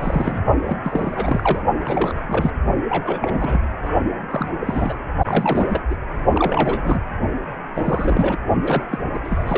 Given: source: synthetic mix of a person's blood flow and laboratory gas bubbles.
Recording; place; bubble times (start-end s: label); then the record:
Doppler ultrasound of blood flow; precordium
0.00-0.43 s: bubbles
0.65-0.77 s: bubbles
0.84-1.63 s: bubbles
1.79-2.25 s: bubbles
2.28-2.52 s: bubbles
2.89-3.61 s: bubbles
3.81-3.90 s: bubbles
4.30-4.51 s: bubbles
4.60-4.99 s: bubbles
5.24-5.83 s: bubbles
5.90-5.95 s: bubbles
6.33-7.00 s: bubbles
7.75-8.38 s: bubbles
8.62-8.84 s: bubbles
8.91-8.99 s: bubbles
9.14-9.19 s: bubbles
9.24-9.58 s: bubbles
From the record:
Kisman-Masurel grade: 332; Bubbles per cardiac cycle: rolling drumbeat, 9 or more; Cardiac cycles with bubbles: 50 to 99%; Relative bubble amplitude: moderate (0.250 to 0.450); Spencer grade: 3 (all of the cardiac periods contain showers or single bubble signals, but not dominating or overriding the cardiac motion signals); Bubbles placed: only in the low amplitude regions of the cardiac cycle